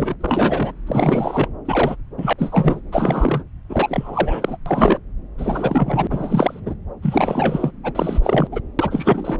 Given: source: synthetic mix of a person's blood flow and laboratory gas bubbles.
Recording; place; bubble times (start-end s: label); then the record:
Doppler ultrasound of blood flow; subclavian vein
0.00-0.15 s: bubbles
0.20-0.73 s: bubbles
0.86-1.48 s: bubbles
1.65-1.96 s: bubbles
2.18-2.33 s: bubbles
2.38-2.80 s: bubbles
2.92-3.44 s: bubbles
3.69-4.57 s: bubbles
4.66-4.97 s: bubbles
5.38-6.07 s: bubbles
6.09-6.60 s: bubbles
6.66-6.75 s: bubbles
7.02-7.71 s: bubbles
7.83-8.20 s: bubbles
8.22-8.48 s: bubbles
8.52-8.61 s: bubbles
8.79-9.40 s: bubbles
From the record:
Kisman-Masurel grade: 333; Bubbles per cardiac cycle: rolling drumbeat, 9 or more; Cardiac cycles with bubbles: 50 to 99%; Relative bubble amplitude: loud (0.450 to 0.775); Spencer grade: 3 (all of the cardiac periods contain showers or single bubble signals, but not dominating or overriding the cardiac motion signals); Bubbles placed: anywhere in the cardiac cycle